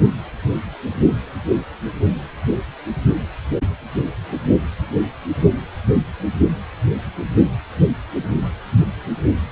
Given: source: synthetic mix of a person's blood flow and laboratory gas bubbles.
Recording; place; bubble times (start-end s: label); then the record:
Doppler ultrasound of blood flow; precordium
no bubbles
From the record:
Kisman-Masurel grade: 000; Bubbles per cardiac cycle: 0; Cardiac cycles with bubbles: 0%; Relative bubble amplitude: no bubbles discernible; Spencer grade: 0 (complete lack of bubble signals)